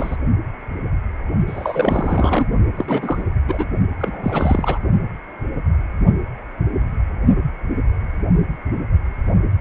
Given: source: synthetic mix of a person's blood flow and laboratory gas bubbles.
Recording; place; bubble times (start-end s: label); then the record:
Doppler ultrasound of blood flow; precordium
0.00-0.17 s: bubbles
1.47-2.46 s: bubbles
2.72-3.23 s: bubbles
3.48-3.66 s: bubbles
3.99-4.78 s: bubbles
From the record:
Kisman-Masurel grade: 332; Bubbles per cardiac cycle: rolling drumbeat, 9 or more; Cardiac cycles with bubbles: 50 to 99%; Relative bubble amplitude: moderate (0.250 to 0.450); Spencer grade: 3 (all of the cardiac periods contain showers or single bubble signals, but not dominating or overriding the cardiac motion signals); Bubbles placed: only in the low amplitude regions of the cardiac cycle